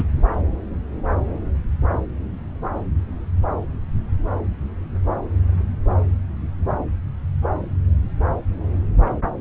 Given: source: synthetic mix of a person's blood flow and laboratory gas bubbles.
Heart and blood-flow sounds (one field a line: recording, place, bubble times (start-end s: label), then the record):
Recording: Doppler ultrasound of blood flow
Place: subclavian vein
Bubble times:
0.00-0.03 s: bubbles
From the record:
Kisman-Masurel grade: 213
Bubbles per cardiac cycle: several, 3 to 8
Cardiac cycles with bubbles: 1 to 10%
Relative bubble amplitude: loud (0.450 to 0.775)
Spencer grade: 1 (occasional bubble signal discernible with the cardiac motion signal, with majority of cardiac periods free of bubbles)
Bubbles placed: anywhere in the cardiac cycle